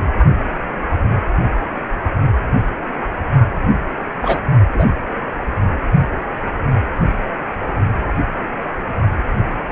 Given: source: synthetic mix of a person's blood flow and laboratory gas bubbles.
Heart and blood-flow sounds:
Doppler ultrasound of blood flow; precordium
4.21-4.40 s: bubbles
4.73-4.88 s: bubbles
From the record:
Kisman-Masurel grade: 123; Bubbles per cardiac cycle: 1 to 2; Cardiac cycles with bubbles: 10 to 50%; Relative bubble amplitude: loud (0.450 to 0.775); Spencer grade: 2 (many but less than half of the cardiac periods contain bubble signals, singularly or in groups); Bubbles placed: only in the low amplitude regions of the cardiac cycle

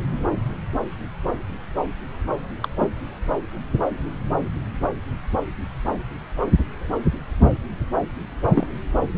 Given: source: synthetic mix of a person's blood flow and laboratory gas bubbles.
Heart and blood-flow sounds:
Doppler ultrasound of blood flow; subclavian vein
2.61-2.68 s: bubbles
2.78-2.88 s: bubbles
8.54-8.66 s: bubbles
From the record:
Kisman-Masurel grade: 122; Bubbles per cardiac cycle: 1 to 2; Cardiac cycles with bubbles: 10 to 50%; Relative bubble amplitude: moderate (0.250 to 0.450); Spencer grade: 2 (many but less than half of the cardiac periods contain bubble signals, singularly or in groups); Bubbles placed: anywhere in the cardiac cycle

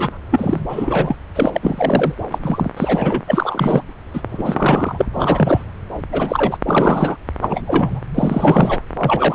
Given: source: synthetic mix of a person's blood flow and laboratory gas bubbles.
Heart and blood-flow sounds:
Doppler ultrasound of blood flow; subclavian vein
0.00-0.17 s: bubbles
0.30-0.60 s: bubbles
0.69-1.16 s: bubbles
1.35-2.15 s: bubbles
2.30-2.38 s: bubbles
2.42-2.69 s: bubbles
2.76-3.23 s: bubbles
3.27-3.82 s: bubbles
4.13-4.21 s: bubbles
4.30-5.05 s: bubbles
5.13-5.63 s: bubbles
6.12-6.58 s: bubbles
6.66-7.17 s: bubbles
7.42-8.01 s: bubbles
8.15-8.81 s: bubbles
8.98-9.35 s: bubbles
From the record:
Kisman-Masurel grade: 343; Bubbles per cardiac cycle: rolling drumbeat, 9 or more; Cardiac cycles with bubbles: 100%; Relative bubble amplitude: loud (0.450 to 0.775); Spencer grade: 3 (all of the cardiac periods contain showers or single bubble signals, but not dominating or overriding the cardiac motion signals); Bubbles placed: anywhere in the cardiac cycle

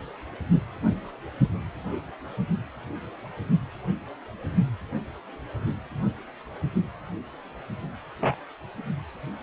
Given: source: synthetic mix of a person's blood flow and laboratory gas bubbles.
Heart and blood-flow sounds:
Doppler ultrasound of blood flow; precordium
8.21-8.35 s: bubbles
From the record:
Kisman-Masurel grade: 112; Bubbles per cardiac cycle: 1 to 2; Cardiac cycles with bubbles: 1 to 10%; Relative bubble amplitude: moderate (0.250 to 0.450); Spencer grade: 1 (occasional bubble signal discernible with the cardiac motion signal, with majority of cardiac periods free of bubbles); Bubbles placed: anywhere in the cardiac cycle

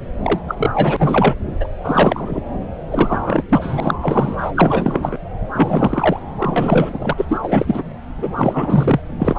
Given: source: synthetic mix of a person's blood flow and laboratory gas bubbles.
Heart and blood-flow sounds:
Doppler ultrasound of blood flow; subclavian vein
0.23-0.39 s: bubbles
0.48-0.97 s: bubbles
0.99-1.35 s: bubbles
1.59-1.68 s: bubbles
1.84-2.40 s: bubbles
2.90-3.44 s: bubbles
3.48-3.97 s: bubbles
4.01-4.35 s: bubbles
4.38-4.51 s: bubbles
4.54-5.17 s: bubbles
5.55-6.23 s: bubbles
6.39-7.25 s: bubbles
7.28-7.40 s: bubbles
7.43-7.83 s: bubbles
8.17-9.01 s: bubbles
9.19-9.39 s: bubbles
From the record:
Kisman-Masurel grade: 343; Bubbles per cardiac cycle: rolling drumbeat, 9 or more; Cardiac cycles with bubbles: 100%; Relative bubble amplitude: loud (0.450 to 0.775); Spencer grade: 3 (all of the cardiac periods contain showers or single bubble signals, but not dominating or overriding the cardiac motion signals); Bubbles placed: anywhere in the cardiac cycle

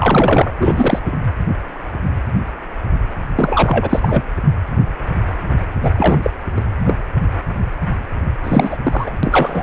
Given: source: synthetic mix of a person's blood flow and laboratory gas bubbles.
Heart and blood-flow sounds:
Doppler ultrasound of blood flow; precordium
0.00-0.51 s: bubbles
0.57-0.99 s: bubbles
1.06-1.18 s: bubbles
3.36-4.24 s: bubbles
5.83-6.30 s: bubbles
6.56-6.65 s: bubbles
6.86-6.96 s: bubbles
8.44-8.77 s: bubbles
8.84-9.12 s: bubbles
9.23-9.63 s: bubbles
From the record:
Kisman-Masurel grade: 333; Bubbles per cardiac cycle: rolling drumbeat, 9 or more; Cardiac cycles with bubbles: 50 to 99%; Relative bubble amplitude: loud (0.450 to 0.775); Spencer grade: 3 (all of the cardiac periods contain showers or single bubble signals, but not dominating or overriding the cardiac motion signals); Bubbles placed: anywhere in the cardiac cycle

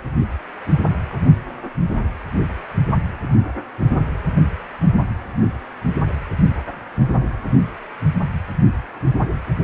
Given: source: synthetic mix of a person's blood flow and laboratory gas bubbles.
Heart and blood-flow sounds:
Doppler ultrasound of blood flow; precordium
1.09-1.14 s: bubbles
From the record:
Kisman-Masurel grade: 111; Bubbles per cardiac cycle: 1 to 2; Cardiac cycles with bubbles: 1 to 10%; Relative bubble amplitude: barely perceptible (0.100 to 0.250); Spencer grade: 1 (occasional bubble signal discernible with the cardiac motion signal, with majority of cardiac periods free of bubbles); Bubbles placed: anywhere in the cardiac cycle

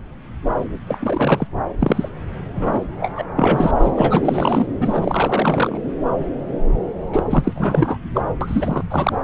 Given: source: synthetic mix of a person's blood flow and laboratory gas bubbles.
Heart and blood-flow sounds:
Doppler ultrasound of blood flow; subclavian vein
0.86-1.47 s: bubbles
1.79-2.09 s: bubbles
2.60-2.83 s: bubbles
3.00-3.10 s: bubbles
3.15-3.25 s: bubbles
3.35-3.72 s: bubbles
3.78-3.91 s: bubbles
3.95-4.67 s: bubbles
4.80-5.79 s: bubbles
7.12-7.23 s: bubbles
7.30-7.97 s: bubbles
8.14-8.22 s: bubbles
8.40-8.83 s: bubbles
8.90-9.13 s: bubbles
From the record:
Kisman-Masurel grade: 333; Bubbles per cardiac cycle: rolling drumbeat, 9 or more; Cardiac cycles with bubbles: 50 to 99%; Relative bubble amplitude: loud (0.450 to 0.775); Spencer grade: 3 (all of the cardiac periods contain showers or single bubble signals, but not dominating or overriding the cardiac motion signals); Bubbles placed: anywhere in the cardiac cycle

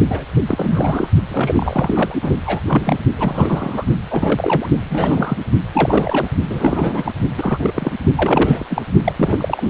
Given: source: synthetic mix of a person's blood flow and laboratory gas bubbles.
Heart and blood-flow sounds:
Doppler ultrasound of blood flow; precordium
0.09-0.24 s: bubbles
0.47-1.07 s: bubbles
1.28-2.15 s: bubbles
2.21-2.37 s: bubbles
2.46-2.60 s: bubbles
2.68-2.98 s: bubbles
3.17-3.85 s: bubbles
4.10-4.69 s: bubbles
4.90-5.38 s: bubbles
5.72-6.28 s: bubbles
6.50-7.12 s: bubbles
7.37-7.72 s: bubbles
7.75-7.93 s: bubbles
8.17-8.67 s: bubbles
8.70-8.82 s: bubbles
9.04-9.12 s: bubbles
9.16-9.70 s: bubbles
From the record:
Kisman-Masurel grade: 332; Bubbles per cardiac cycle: rolling drumbeat, 9 or more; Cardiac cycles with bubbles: 50 to 99%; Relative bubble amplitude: moderate (0.250 to 0.450); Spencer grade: 3 (all of the cardiac periods contain showers or single bubble signals, but not dominating or overriding the cardiac motion signals); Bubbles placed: only in the low amplitude regions of the cardiac cycle

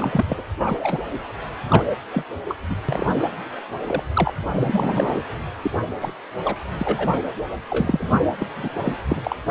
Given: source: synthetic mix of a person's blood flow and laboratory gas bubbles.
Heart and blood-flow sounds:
Doppler ultrasound of blood flow; precordium
0.00-0.25 s: bubbles
0.29-0.41 s: bubbles
0.60-0.79 s: bubbles
0.83-0.99 s: bubbles
1.68-1.83 s: bubbles
2.12-2.24 s: bubbles
2.48-2.55 s: bubbles
2.69-2.75 s: bubbles
2.88-3.17 s: bubbles
3.87-4.03 s: bubbles
4.13-4.33 s: bubbles
4.55-5.19 s: bubbles
5.62-5.71 s: bubbles
6.00-6.14 s: bubbles
6.45-6.53 s: bubbles
6.79-7.21 s: bubbles
7.70-8.15 s: bubbles
8.40-8.46 s: bubbles
8.56-8.78 s: bubbles
8.84-8.97 s: bubbles
9.09-9.36 s: bubbles
9.47-9.51 s: bubbles
From the record:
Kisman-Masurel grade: 242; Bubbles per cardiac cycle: several, 3 to 8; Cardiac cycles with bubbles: 100%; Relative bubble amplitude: moderate (0.250 to 0.450); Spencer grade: 3 (all of the cardiac periods contain showers or single bubble signals, but not dominating or overriding the cardiac motion signals); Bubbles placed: anywhere in the cardiac cycle

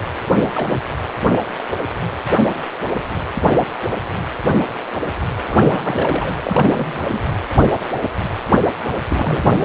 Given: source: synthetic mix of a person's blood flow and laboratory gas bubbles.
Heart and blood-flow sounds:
Doppler ultrasound of blood flow; precordium
0.39-0.79 s: bubbles
5.42-6.36 s: bubbles
6.46-7.22 s: bubbles
9.09-9.65 s: bubbles
From the record:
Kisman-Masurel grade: 222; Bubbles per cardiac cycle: several, 3 to 8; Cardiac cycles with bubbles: 10 to 50%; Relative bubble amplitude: moderate (0.250 to 0.450); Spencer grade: 2 (many but less than half of the cardiac periods contain bubble signals, singularly or in groups); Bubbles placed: anywhere in the cardiac cycle

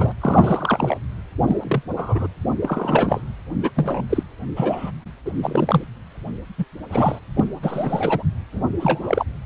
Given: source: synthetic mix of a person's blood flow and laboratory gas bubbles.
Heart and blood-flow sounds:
Doppler ultrasound of blood flow; precordium
0.00-0.13 s: bubbles
0.21-0.97 s: bubbles
1.46-1.58 s: bubbles
1.63-1.82 s: bubbles
1.97-2.27 s: bubbles
2.62-3.21 s: bubbles
3.62-3.70 s: bubbles
3.75-4.01 s: bubbles
4.09-4.23 s: bubbles
4.56-4.91 s: bubbles
5.25-5.30 s: bubbles
5.43-5.86 s: bubbles
6.58-6.65 s: bubbles
6.91-7.20 s: bubbles
7.36-7.48 s: bubbles
7.62-8.23 s: bubbles
8.52-8.63 s: bubbles
8.80-9.24 s: bubbles
From the record:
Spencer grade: 3 (all of the cardiac periods contain showers or single bubble signals, but not dominating or overriding the cardiac motion signals); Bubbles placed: anywhere in the cardiac cycle

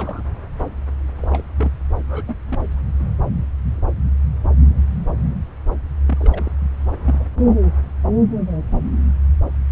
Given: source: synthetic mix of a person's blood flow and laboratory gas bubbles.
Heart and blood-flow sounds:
Doppler ultrasound of blood flow; subclavian vein
0.00-0.22 s: bubbles
1.20-1.43 s: bubbles
1.58-1.72 s: bubbles
1.96-2.23 s: bubbles
2.27-2.35 s: bubbles
2.46-2.69 s: bubbles
6.05-6.52 s: bubbles
6.60-6.70 s: bubbles
7.06-7.25 s: bubbles
7.35-7.45 s: bubbles
From the record:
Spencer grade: 2 (many but less than half of the cardiac periods contain bubble signals, singularly or in groups); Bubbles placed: anywhere in the cardiac cycle

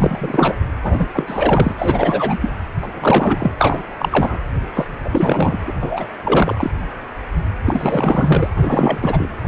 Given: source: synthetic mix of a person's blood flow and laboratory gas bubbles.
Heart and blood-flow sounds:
Doppler ultrasound of blood flow; precordium
0.00-0.55 s: bubbles
0.83-1.05 s: bubbles
1.13-1.75 s: bubbles
1.78-2.50 s: bubbles
2.81-3.52 s: bubbles
3.57-3.84 s: bubbles
3.98-4.38 s: bubbles
4.73-4.85 s: bubbles
5.04-5.58 s: bubbles
5.66-5.72 s: bubbles
5.81-6.06 s: bubbles
6.24-6.71 s: bubbles
7.66-8.49 s: bubbles
8.56-9.27 s: bubbles
From the record:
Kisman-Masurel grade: 333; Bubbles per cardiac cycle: rolling drumbeat, 9 or more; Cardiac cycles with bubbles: 50 to 99%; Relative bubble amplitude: loud (0.450 to 0.775); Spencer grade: 3 (all of the cardiac periods contain showers or single bubble signals, but not dominating or overriding the cardiac motion signals); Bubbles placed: anywhere in the cardiac cycle

